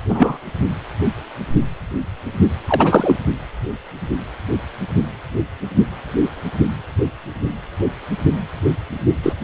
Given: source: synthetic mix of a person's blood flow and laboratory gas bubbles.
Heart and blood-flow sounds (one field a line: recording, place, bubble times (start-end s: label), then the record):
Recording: Doppler ultrasound of blood flow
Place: precordium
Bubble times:
0.09-0.38 s: bubbles
2.67-3.17 s: bubbles
9.22-9.32 s: bubbles
From the record:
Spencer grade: 2 (many but less than half of the cardiac periods contain bubble signals, singularly or in groups)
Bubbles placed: only in the low amplitude regions of the cardiac cycle